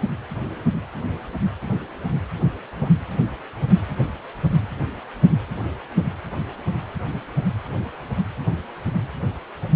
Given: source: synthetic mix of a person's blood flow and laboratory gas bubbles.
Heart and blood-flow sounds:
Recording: Doppler ultrasound of blood flow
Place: precordium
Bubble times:
2.77-2.92 s: bubbles
From the record:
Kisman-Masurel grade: 113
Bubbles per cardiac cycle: 1 to 2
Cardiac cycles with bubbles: 1 to 10%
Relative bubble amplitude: loud (0.450 to 0.775)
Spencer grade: 1 (occasional bubble signal discernible with the cardiac motion signal, with majority of cardiac periods free of bubbles)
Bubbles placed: anywhere in the cardiac cycle

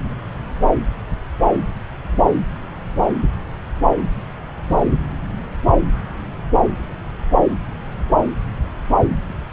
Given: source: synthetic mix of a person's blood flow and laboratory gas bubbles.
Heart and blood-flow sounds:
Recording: Doppler ultrasound of blood flow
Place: subclavian vein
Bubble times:
no bubbles
From the record:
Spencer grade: 0 (complete lack of bubble signals)

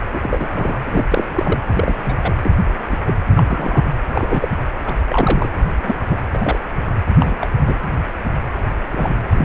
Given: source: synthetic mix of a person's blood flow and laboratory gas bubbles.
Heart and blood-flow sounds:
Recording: Doppler ultrasound of blood flow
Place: precordium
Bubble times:
0.13-0.20 s: bubbles
0.22-0.48 s: bubbles
0.53-0.80 s: bubbles
0.85-1.04 s: bubbles
1.09-1.26 s: bubbles
1.35-1.60 s: bubbles
1.69-2.33 s: bubbles
2.43-2.56 s: bubbles
2.89-2.98 s: bubbles
3.06-3.14 s: bubbles
3.30-3.43 s: bubbles
3.46-3.85 s: bubbles
4.09-4.48 s: bubbles
4.86-4.94 s: bubbles
5.06-5.49 s: bubbles
5.83-5.96 s: bubbles
6.10-6.18 s: bubbles
6.31-6.59 s: bubbles
7.20-7.38 s: bubbles
7.40-7.47 s: bubbles
7.66-7.75 s: bubbles
8.92-9.13 s: bubbles
9.32-9.45 s: bubbles
From the record:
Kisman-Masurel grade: 232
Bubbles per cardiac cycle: several, 3 to 8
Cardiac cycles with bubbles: 50 to 99%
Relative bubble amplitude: moderate (0.250 to 0.450)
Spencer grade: 3 (all of the cardiac periods contain showers or single bubble signals, but not dominating or overriding the cardiac motion signals)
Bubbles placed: anywhere in the cardiac cycle

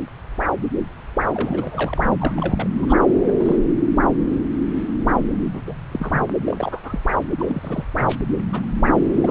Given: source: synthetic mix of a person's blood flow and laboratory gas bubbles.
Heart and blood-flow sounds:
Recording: Doppler ultrasound of blood flow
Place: subclavian vein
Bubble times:
1.34-2.01 s: bubbles
2.19-2.69 s: bubbles
2.76-2.85 s: bubbles
2.89-2.95 s: bubbles
3.26-3.31 s: bubbles
3.39-3.56 s: bubbles
5.44-5.49 s: bubbles
5.53-5.61 s: bubbles
5.67-5.75 s: bubbles
5.92-6.80 s: bubbles
6.83-7.00 s: bubbles
7.38-7.84 s: bubbles
7.98-8.17 s: bubbles
8.52-8.66 s: bubbles
9.22-9.31 s: bubbles
From the record:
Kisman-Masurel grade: 232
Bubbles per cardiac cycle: several, 3 to 8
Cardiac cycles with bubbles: 50 to 99%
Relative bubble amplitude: moderate (0.250 to 0.450)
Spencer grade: 3 (all of the cardiac periods contain showers or single bubble signals, but not dominating or overriding the cardiac motion signals)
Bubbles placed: anywhere in the cardiac cycle

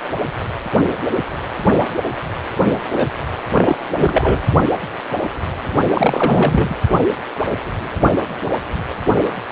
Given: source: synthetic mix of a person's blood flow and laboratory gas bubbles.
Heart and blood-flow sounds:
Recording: Doppler ultrasound of blood flow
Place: precordium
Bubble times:
2.91-3.09 s: bubbles
3.54-3.76 s: bubbles
3.97-4.41 s: bubbles
5.94-6.74 s: bubbles
From the record:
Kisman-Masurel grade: 223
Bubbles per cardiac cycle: several, 3 to 8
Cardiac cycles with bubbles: 10 to 50%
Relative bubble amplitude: loud (0.450 to 0.775)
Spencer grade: 2 (many but less than half of the cardiac periods contain bubble signals, singularly or in groups)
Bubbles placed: only in the low amplitude regions of the cardiac cycle

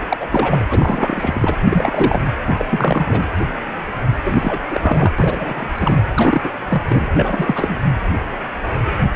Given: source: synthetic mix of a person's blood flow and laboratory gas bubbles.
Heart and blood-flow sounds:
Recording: Doppler ultrasound of blood flow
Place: precordium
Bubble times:
0.09-0.17 s: bubbles
0.20-0.65 s: bubbles
0.69-1.56 s: bubbles
1.65-2.22 s: bubbles
2.48-2.65 s: bubbles
2.71-3.27 s: bubbles
4.24-4.61 s: bubbles
4.69-5.13 s: bubbles
5.18-5.68 s: bubbles
5.75-5.98 s: bubbles
6.16-6.51 s: bubbles
6.69-6.83 s: bubbles
6.89-7.07 s: bubbles
7.15-7.79 s: bubbles
From the record:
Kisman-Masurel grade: 332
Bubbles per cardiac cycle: rolling drumbeat, 9 or more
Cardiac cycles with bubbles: 50 to 99%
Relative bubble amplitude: moderate (0.250 to 0.450)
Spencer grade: 3 (all of the cardiac periods contain showers or single bubble signals, but not dominating or overriding the cardiac motion signals)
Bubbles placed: anywhere in the cardiac cycle

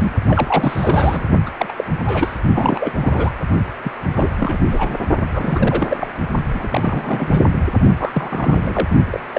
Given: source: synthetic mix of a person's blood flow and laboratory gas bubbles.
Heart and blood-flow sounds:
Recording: Doppler ultrasound of blood flow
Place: precordium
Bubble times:
0.00-0.12 s: bubbles
0.28-1.30 s: bubbles
1.46-1.50 s: bubbles
1.58-1.73 s: bubbles
1.76-1.84 s: bubbles
2.06-2.38 s: bubbles
2.54-2.92 s: bubbles
3.00-3.33 s: bubbles
3.84-3.92 s: bubbles
4.13-4.58 s: bubbles
4.71-4.95 s: bubbles
5.30-6.08 s: bubbles
6.54-7.60 s: bubbles
7.98-8.12 s: bubbles
8.14-8.88 s: bubbles
9.10-9.20 s: bubbles
9.35-9.39 s: bubbles
From the record:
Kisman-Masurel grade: 342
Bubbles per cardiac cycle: rolling drumbeat, 9 or more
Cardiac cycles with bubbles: 100%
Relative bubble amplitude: moderate (0.250 to 0.450)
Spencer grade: 3 (all of the cardiac periods contain showers or single bubble signals, but not dominating or overriding the cardiac motion signals)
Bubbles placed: only in the low amplitude regions of the cardiac cycle

